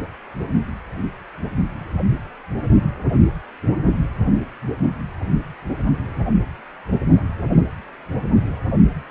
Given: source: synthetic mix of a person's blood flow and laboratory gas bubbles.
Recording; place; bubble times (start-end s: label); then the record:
Doppler ultrasound of blood flow; precordium
no bubbles
From the record:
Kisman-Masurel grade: 000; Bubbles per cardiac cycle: 0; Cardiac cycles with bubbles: 0%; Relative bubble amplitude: no bubbles discernible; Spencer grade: 0 (complete lack of bubble signals)